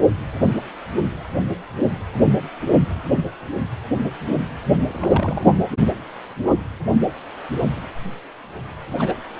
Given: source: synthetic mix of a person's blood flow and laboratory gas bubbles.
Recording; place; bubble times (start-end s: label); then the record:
Doppler ultrasound of blood flow; precordium
4.88-5.58 s: bubbles
8.93-9.17 s: bubbles
From the record:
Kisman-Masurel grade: 222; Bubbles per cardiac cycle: several, 3 to 8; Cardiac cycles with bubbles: 10 to 50%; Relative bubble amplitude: moderate (0.250 to 0.450); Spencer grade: 2 (many but less than half of the cardiac periods contain bubble signals, singularly or in groups); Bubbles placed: only in the low amplitude regions of the cardiac cycle